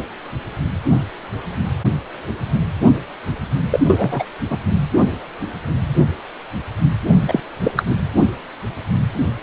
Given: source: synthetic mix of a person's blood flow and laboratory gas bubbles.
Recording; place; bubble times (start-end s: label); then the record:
Doppler ultrasound of blood flow; precordium
3.70-3.80 s: bubbles
3.86-4.23 s: bubbles
4.50-4.57 s: bubbles
7.27-7.40 s: bubbles
7.63-7.71 s: bubbles
7.76-7.82 s: bubbles
7.86-7.96 s: bubbles
From the record:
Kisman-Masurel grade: 223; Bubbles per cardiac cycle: several, 3 to 8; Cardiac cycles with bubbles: 10 to 50%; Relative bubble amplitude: loud (0.450 to 0.775); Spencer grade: 2 (many but less than half of the cardiac periods contain bubble signals, singularly or in groups); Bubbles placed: anywhere in the cardiac cycle